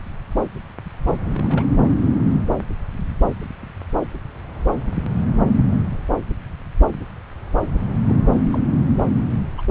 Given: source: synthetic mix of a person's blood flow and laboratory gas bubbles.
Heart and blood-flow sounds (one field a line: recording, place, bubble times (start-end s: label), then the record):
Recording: Doppler ultrasound of blood flow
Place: subclavian vein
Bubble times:
1.05-1.14 s: bubbles
1.27-1.64 s: bubbles
8.06-8.20 s: bubbles
8.33-8.42 s: bubbles
8.52-8.59 s: bubbles
9.58-9.62 s: bubbles
From the record:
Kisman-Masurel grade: 221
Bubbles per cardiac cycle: several, 3 to 8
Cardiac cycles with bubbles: 10 to 50%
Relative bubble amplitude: barely perceptible (0.100 to 0.250)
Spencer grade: 2 (many but less than half of the cardiac periods contain bubble signals, singularly or in groups)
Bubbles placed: anywhere in the cardiac cycle